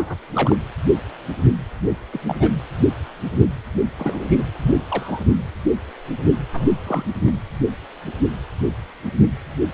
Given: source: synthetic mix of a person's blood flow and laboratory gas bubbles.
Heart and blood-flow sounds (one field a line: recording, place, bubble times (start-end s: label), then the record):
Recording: Doppler ultrasound of blood flow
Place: precordium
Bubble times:
0.00-0.15 s: bubbles
0.33-0.56 s: bubbles
2.12-2.20 s: bubbles
2.27-2.36 s: bubbles
2.40-2.52 s: bubbles
3.98-4.25 s: bubbles
4.29-4.43 s: bubbles
4.63-4.72 s: bubbles
4.90-5.23 s: bubbles
6.53-6.67 s: bubbles
6.86-7.03 s: bubbles
7.24-7.39 s: bubbles
From the record:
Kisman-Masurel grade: 222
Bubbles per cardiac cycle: several, 3 to 8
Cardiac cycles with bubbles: 10 to 50%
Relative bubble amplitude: moderate (0.250 to 0.450)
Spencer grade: 2 (many but less than half of the cardiac periods contain bubble signals, singularly or in groups)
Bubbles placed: anywhere in the cardiac cycle